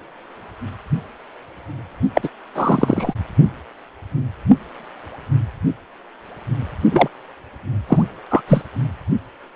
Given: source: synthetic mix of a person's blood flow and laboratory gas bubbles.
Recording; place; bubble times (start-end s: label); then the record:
Doppler ultrasound of blood flow; precordium
2.15-2.29 s: bubbles
2.55-3.14 s: bubbles
6.91-7.08 s: bubbles
7.88-8.04 s: bubbles
8.30-8.41 s: bubbles
8.47-8.62 s: bubbles
From the record:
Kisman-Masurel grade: 223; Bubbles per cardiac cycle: several, 3 to 8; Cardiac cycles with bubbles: 10 to 50%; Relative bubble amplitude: loud (0.450 to 0.775); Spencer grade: 2 (many but less than half of the cardiac periods contain bubble signals, singularly or in groups); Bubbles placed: only in the low amplitude regions of the cardiac cycle